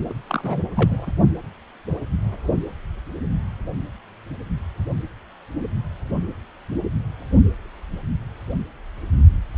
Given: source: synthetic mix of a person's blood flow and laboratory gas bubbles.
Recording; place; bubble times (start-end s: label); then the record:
Doppler ultrasound of blood flow; precordium
0.10-0.14 s: bubbles
0.27-0.62 s: bubbles
0.76-1.11 s: bubbles
From the record:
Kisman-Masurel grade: 212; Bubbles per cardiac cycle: several, 3 to 8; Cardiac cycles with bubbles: 1 to 10%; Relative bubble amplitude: moderate (0.250 to 0.450); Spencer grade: 1 (occasional bubble signal discernible with the cardiac motion signal, with majority of cardiac periods free of bubbles); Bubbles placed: only in the low amplitude regions of the cardiac cycle